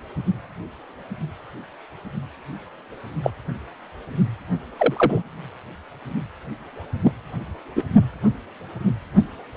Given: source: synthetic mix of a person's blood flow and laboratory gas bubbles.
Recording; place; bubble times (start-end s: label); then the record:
Doppler ultrasound of blood flow; precordium
3.23-3.31 s: bubbles
4.76-5.22 s: bubbles
7.03-7.12 s: bubbles
7.75-7.85 s: bubbles
From the record:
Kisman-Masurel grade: 123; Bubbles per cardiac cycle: 1 to 2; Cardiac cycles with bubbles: 10 to 50%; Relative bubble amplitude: loud (0.450 to 0.775); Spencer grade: 2 (many but less than half of the cardiac periods contain bubble signals, singularly or in groups); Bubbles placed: only in the low amplitude regions of the cardiac cycle